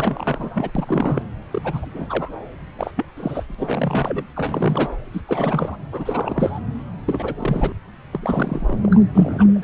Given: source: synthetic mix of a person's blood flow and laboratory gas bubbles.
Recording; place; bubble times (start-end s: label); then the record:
Doppler ultrasound of blood flow; subclavian vein
0.00-0.70 s: bubbles
0.75-1.23 s: bubbles
1.51-1.61 s: bubbles
1.64-1.85 s: bubbles
1.94-2.06 s: bubbles
2.09-2.30 s: bubbles
2.75-2.91 s: bubbles
2.96-3.06 s: bubbles
3.17-3.44 s: bubbles
3.48-3.55 s: bubbles
3.58-4.25 s: bubbles
4.36-4.96 s: bubbles
5.12-5.21 s: bubbles
5.27-5.77 s: bubbles
5.92-6.60 s: bubbles
7.06-7.34 s: bubbles
7.38-7.74 s: bubbles
8.11-8.78 s: bubbles
8.83-9.00 s: bubbles
9.13-9.64 s: bubbles
From the record:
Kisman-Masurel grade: 342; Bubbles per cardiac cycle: rolling drumbeat, 9 or more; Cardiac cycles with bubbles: 100%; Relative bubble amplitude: moderate (0.250 to 0.450); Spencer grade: 3 (all of the cardiac periods contain showers or single bubble signals, but not dominating or overriding the cardiac motion signals); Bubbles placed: anywhere in the cardiac cycle